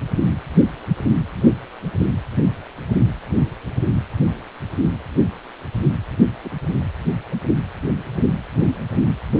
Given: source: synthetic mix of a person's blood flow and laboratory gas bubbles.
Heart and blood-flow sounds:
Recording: Doppler ultrasound of blood flow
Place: precordium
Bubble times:
6.44-6.50 s: bubbles
From the record:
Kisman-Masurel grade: 112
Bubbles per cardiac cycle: 1 to 2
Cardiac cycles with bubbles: 1 to 10%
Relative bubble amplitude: moderate (0.250 to 0.450)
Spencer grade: 1 (occasional bubble signal discernible with the cardiac motion signal, with majority of cardiac periods free of bubbles)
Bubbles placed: anywhere in the cardiac cycle

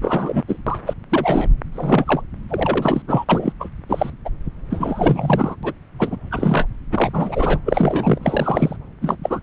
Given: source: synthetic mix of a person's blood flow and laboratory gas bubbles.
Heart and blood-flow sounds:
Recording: Doppler ultrasound of blood flow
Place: subclavian vein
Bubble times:
0.01-0.43 s: bubbles
0.48-0.58 s: bubbles
0.67-0.78 s: bubbles
0.85-0.94 s: bubbles
1.09-1.50 s: bubbles
1.72-2.21 s: bubbles
2.49-3.02 s: bubbles
3.08-3.25 s: bubbles
3.29-3.52 s: bubbles
3.60-3.68 s: bubbles
3.89-4.10 s: bubbles
4.25-4.29 s: bubbles
4.69-5.55 s: bubbles
5.63-5.73 s: bubbles
5.98-6.17 s: bubbles
6.31-6.67 s: bubbles
6.91-7.09 s: bubbles
7.13-7.59 s: bubbles
7.66-8.19 s: bubbles
8.22-8.77 s: bubbles
9.01-9.17 s: bubbles
9.23-9.40 s: bubbles
From the record:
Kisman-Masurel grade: 243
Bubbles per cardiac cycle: several, 3 to 8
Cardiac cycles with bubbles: 100%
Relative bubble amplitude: loud (0.450 to 0.775)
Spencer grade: 3 (all of the cardiac periods contain showers or single bubble signals, but not dominating or overriding the cardiac motion signals)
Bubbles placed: anywhere in the cardiac cycle

